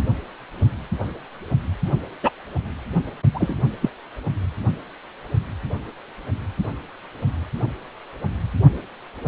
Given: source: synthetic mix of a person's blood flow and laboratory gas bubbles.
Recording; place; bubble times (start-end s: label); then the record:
Doppler ultrasound of blood flow; precordium
2.23-2.31 s: bubbles
3.34-3.54 s: bubbles
3.81-3.90 s: bubbles
From the record:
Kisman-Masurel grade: 123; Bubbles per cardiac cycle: 1 to 2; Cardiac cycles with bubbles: 10 to 50%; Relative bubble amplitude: loud (0.450 to 0.775); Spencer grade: 2 (many but less than half of the cardiac periods contain bubble signals, singularly or in groups); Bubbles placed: only in the low amplitude regions of the cardiac cycle